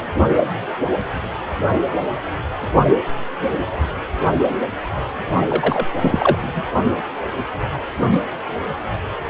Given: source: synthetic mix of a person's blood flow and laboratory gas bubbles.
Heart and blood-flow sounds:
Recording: Doppler ultrasound of blood flow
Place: precordium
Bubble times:
5.48-5.87 s: bubbles
6.01-6.63 s: bubbles
From the record:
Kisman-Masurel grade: 213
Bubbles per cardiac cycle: several, 3 to 8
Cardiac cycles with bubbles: 1 to 10%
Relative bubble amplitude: loud (0.450 to 0.775)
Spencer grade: 1 (occasional bubble signal discernible with the cardiac motion signal, with majority of cardiac periods free of bubbles)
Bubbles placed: only in the low amplitude regions of the cardiac cycle

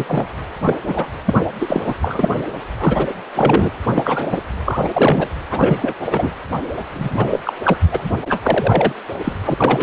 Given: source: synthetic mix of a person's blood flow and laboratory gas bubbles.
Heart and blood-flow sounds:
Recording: Doppler ultrasound of blood flow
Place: precordium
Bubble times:
0.00-0.26 s: bubbles
0.65-0.78 s: bubbles
0.86-1.07 s: bubbles
1.25-1.34 s: bubbles
1.59-1.82 s: bubbles
1.85-1.94 s: bubbles
2.02-2.29 s: bubbles
2.34-2.44 s: bubbles
2.77-3.07 s: bubbles
3.35-3.71 s: bubbles
3.95-4.41 s: bubbles
4.65-4.89 s: bubbles
4.92-5.29 s: bubbles
5.50-5.95 s: bubbles
6.10-6.30 s: bubbles
6.93-7.41 s: bubbles
7.43-7.53 s: bubbles
7.64-7.76 s: bubbles
7.92-8.02 s: bubbles
8.29-8.40 s: bubbles
8.43-8.93 s: bubbles
9.24-9.33 s: bubbles
9.44-9.54 s: bubbles
9.57-9.82 s: bubbles
From the record:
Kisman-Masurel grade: 243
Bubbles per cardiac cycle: several, 3 to 8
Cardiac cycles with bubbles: 100%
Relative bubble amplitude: loud (0.450 to 0.775)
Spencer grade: 3 (all of the cardiac periods contain showers or single bubble signals, but not dominating or overriding the cardiac motion signals)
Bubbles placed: anywhere in the cardiac cycle

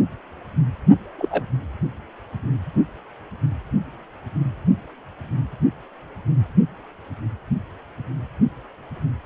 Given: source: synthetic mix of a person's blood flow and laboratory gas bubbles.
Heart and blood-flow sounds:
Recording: Doppler ultrasound of blood flow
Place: precordium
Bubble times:
1.18-1.43 s: bubbles
From the record:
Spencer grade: 1 (occasional bubble signal discernible with the cardiac motion signal, with majority of cardiac periods free of bubbles)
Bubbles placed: only in the low amplitude regions of the cardiac cycle

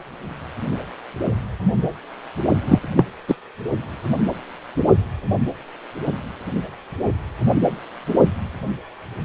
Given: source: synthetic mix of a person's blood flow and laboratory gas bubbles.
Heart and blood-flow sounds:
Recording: Doppler ultrasound of blood flow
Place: precordium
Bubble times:
2.68-2.79 s: bubbles
2.96-3.05 s: bubbles
3.28-3.35 s: bubbles
From the record:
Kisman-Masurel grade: 223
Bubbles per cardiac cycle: several, 3 to 8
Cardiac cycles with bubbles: 10 to 50%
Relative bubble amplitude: loud (0.450 to 0.775)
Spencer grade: 2 (many but less than half of the cardiac periods contain bubble signals, singularly or in groups)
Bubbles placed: only in the low amplitude regions of the cardiac cycle

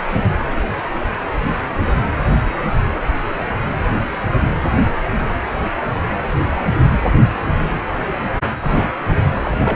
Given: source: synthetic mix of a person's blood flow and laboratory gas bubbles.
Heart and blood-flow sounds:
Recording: Doppler ultrasound of blood flow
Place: precordium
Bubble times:
8.61-8.82 s: bubbles
9.33-9.57 s: bubbles
9.64-9.76 s: bubbles
From the record:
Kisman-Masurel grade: 221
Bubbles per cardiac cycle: several, 3 to 8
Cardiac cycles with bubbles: 10 to 50%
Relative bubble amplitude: barely perceptible (0.100 to 0.250)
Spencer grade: 2 (many but less than half of the cardiac periods contain bubble signals, singularly or in groups)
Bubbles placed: anywhere in the cardiac cycle

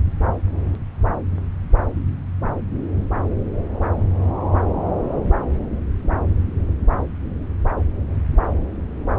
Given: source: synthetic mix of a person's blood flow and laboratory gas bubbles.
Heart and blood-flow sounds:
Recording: Doppler ultrasound of blood flow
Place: subclavian vein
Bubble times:
no bubbles
From the record:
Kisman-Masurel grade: 000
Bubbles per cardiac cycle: 0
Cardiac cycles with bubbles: 0%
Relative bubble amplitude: no bubbles discernible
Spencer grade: 0 (complete lack of bubble signals)

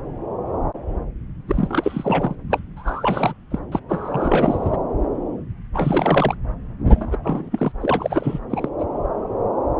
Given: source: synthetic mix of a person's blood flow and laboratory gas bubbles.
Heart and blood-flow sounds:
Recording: Doppler ultrasound of blood flow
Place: subclavian vein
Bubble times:
1.48-2.35 s: bubbles
2.50-2.60 s: bubbles
2.77-3.33 s: bubbles
3.51-3.59 s: bubbles
3.72-3.80 s: bubbles
3.89-4.76 s: bubbles
5.73-6.35 s: bubbles
6.88-7.17 s: bubbles
7.23-7.72 s: bubbles
7.79-8.39 s: bubbles
8.49-8.69 s: bubbles
8.79-8.86 s: bubbles
From the record:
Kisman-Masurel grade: 332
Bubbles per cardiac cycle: rolling drumbeat, 9 or more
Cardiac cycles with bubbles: 50 to 99%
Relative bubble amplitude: moderate (0.250 to 0.450)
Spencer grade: 3 (all of the cardiac periods contain showers or single bubble signals, but not dominating or overriding the cardiac motion signals)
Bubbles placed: anywhere in the cardiac cycle

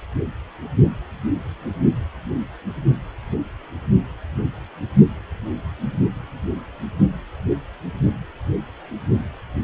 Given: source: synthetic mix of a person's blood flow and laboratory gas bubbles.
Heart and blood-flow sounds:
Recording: Doppler ultrasound of blood flow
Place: precordium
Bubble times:
no bubbles
From the record:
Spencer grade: 0 (complete lack of bubble signals)

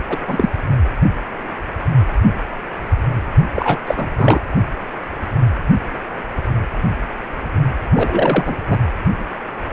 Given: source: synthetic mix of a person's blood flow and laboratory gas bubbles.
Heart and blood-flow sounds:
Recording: Doppler ultrasound of blood flow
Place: precordium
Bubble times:
0.09-0.17 s: bubbles
0.27-0.49 s: bubbles
3.55-3.81 s: bubbles
3.86-4.08 s: bubbles
4.17-4.38 s: bubbles
7.94-8.57 s: bubbles
8.68-8.79 s: bubbles
From the record:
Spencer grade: 2 (many but less than half of the cardiac periods contain bubble signals, singularly or in groups)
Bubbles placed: anywhere in the cardiac cycle

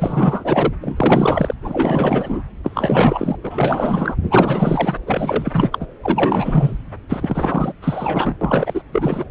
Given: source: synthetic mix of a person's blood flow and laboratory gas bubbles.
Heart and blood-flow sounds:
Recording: Doppler ultrasound of blood flow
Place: subclavian vein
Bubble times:
0.00-0.73 s: bubbles
0.81-1.54 s: bubbles
1.62-2.43 s: bubbles
2.63-3.36 s: bubbles
3.43-4.16 s: bubbles
4.22-4.97 s: bubbles
5.07-5.86 s: bubbles
6.02-6.78 s: bubbles
7.09-7.74 s: bubbles
7.82-8.35 s: bubbles
8.41-8.82 s: bubbles
8.92-9.25 s: bubbles
From the record:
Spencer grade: 4 (maximum detectable bubble signal sounding continuously throughout systole and diastole of every cardiac period, and overriding the amplitude of the normal cardiac signals)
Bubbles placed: anywhere in the cardiac cycle

